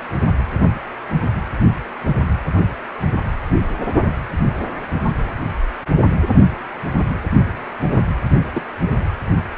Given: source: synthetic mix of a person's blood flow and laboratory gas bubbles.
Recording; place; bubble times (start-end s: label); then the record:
Doppler ultrasound of blood flow; precordium
7.91-7.99 s: bubbles
8.53-8.62 s: bubbles
From the record:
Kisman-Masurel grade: 121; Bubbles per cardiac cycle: 1 to 2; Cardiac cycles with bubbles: 10 to 50%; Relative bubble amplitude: barely perceptible (0.100 to 0.250); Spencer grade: 2 (many but less than half of the cardiac periods contain bubble signals, singularly or in groups); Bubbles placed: anywhere in the cardiac cycle